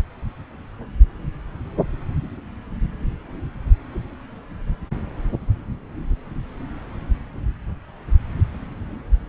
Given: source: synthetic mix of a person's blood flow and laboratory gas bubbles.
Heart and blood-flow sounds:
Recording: Doppler ultrasound of blood flow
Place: subclavian vein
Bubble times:
no bubbles
From the record:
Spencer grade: 0 (complete lack of bubble signals)

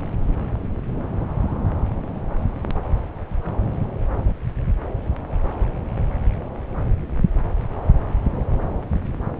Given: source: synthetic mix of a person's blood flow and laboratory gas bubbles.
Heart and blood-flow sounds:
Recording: Doppler ultrasound of blood flow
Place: subclavian vein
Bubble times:
no bubbles
From the record:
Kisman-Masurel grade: 000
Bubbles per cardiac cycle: 0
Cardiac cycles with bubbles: 0%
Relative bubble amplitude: no bubbles discernible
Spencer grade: 0 (complete lack of bubble signals)

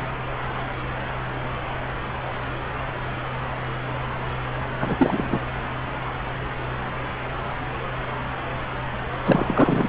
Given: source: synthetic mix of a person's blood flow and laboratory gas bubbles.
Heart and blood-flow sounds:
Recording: Doppler ultrasound of blood flow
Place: subclavian vein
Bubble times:
4.80-4.96 s: bubbles
4.98-5.40 s: bubbles
9.25-9.89 s: bubbles
From the record:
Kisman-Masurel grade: 223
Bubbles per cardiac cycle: several, 3 to 8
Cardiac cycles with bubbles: 10 to 50%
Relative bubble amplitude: loud (0.450 to 0.775)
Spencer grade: 2 (many but less than half of the cardiac periods contain bubble signals, singularly or in groups)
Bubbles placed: anywhere in the cardiac cycle

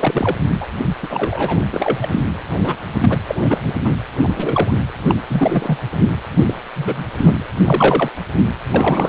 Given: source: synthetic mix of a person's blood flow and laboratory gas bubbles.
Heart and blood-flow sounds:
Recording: Doppler ultrasound of blood flow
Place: precordium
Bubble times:
0.00-0.36 s: bubbles
0.60-0.67 s: bubbles
1.03-1.56 s: bubbles
1.73-2.08 s: bubbles
2.10-2.21 s: bubbles
2.57-2.81 s: bubbles
3.02-3.18 s: bubbles
3.28-3.35 s: bubbles
3.40-3.72 s: bubbles
3.84-3.94 s: bubbles
4.23-4.71 s: bubbles
5.08-5.15 s: bubbles
5.29-5.78 s: bubbles
6.38-6.54 s: bubbles
6.75-7.04 s: bubbles
7.15-7.43 s: bubbles
7.65-8.09 s: bubbles
8.33-8.39 s: bubbles
8.73-9.09 s: bubbles
From the record:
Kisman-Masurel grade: 242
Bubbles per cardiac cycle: several, 3 to 8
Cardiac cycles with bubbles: 100%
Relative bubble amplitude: moderate (0.250 to 0.450)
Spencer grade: 3 (all of the cardiac periods contain showers or single bubble signals, but not dominating or overriding the cardiac motion signals)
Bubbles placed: anywhere in the cardiac cycle

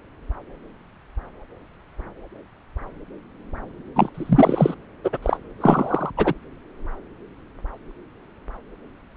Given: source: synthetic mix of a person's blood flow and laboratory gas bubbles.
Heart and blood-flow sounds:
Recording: Doppler ultrasound of blood flow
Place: subclavian vein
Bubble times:
3.96-4.09 s: bubbles
4.14-4.75 s: bubbles
5.04-5.10 s: bubbles
5.12-5.17 s: bubbles
5.22-5.37 s: bubbles
5.60-6.10 s: bubbles
6.17-6.34 s: bubbles
From the record:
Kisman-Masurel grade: 223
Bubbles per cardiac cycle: several, 3 to 8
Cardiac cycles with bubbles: 10 to 50%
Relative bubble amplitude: loud (0.450 to 0.775)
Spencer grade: 2 (many but less than half of the cardiac periods contain bubble signals, singularly or in groups)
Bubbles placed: anywhere in the cardiac cycle

